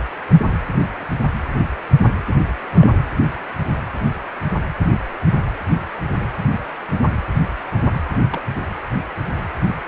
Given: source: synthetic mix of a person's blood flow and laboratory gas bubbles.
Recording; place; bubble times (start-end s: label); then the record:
Doppler ultrasound of blood flow; precordium
2.75-2.88 s: bubbles
8.30-8.41 s: bubbles
From the record:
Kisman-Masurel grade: 121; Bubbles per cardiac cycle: 1 to 2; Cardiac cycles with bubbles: 10 to 50%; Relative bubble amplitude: barely perceptible (0.100 to 0.250); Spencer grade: 2 (many but less than half of the cardiac periods contain bubble signals, singularly or in groups); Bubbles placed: anywhere in the cardiac cycle